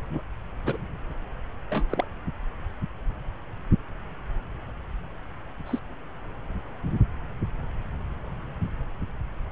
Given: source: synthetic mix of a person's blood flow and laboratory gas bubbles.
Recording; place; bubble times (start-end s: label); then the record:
Doppler ultrasound of blood flow; subclavian vein
0.06-0.23 s: bubbles
0.66-0.77 s: bubbles
1.70-1.84 s: bubbles
1.92-2.06 s: bubbles
5.66-5.79 s: bubbles
From the record:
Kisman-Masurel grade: 121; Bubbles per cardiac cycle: 1 to 2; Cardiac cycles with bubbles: 10 to 50%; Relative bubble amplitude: barely perceptible (0.100 to 0.250); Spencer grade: 2 (many but less than half of the cardiac periods contain bubble signals, singularly or in groups); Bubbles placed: anywhere in the cardiac cycle